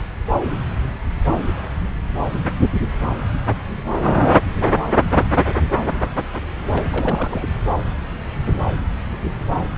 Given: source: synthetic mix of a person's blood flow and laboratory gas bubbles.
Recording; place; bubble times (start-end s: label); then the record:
Doppler ultrasound of blood flow; subclavian vein
6.72-6.83 s: bubbles
6.92-7.47 s: bubbles
From the record:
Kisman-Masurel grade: 222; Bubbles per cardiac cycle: several, 3 to 8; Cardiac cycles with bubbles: 10 to 50%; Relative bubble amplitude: moderate (0.250 to 0.450); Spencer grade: 2 (many but less than half of the cardiac periods contain bubble signals, singularly or in groups); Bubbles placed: anywhere in the cardiac cycle